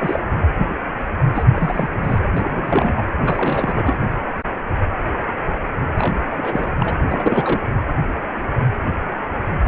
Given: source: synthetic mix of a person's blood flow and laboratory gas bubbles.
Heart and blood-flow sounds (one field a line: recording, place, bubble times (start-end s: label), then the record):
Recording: Doppler ultrasound of blood flow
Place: precordium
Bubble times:
0.00-0.19 s: bubbles
1.35-1.43 s: bubbles
1.55-2.20 s: bubbles
2.37-3.03 s: bubbles
3.24-3.98 s: bubbles
5.96-6.15 s: bubbles
6.37-6.71 s: bubbles
6.74-6.99 s: bubbles
7.11-7.66 s: bubbles
From the record:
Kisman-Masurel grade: 332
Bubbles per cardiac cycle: rolling drumbeat, 9 or more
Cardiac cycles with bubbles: 50 to 99%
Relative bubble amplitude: moderate (0.250 to 0.450)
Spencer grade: 3 (all of the cardiac periods contain showers or single bubble signals, but not dominating or overriding the cardiac motion signals)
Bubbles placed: anywhere in the cardiac cycle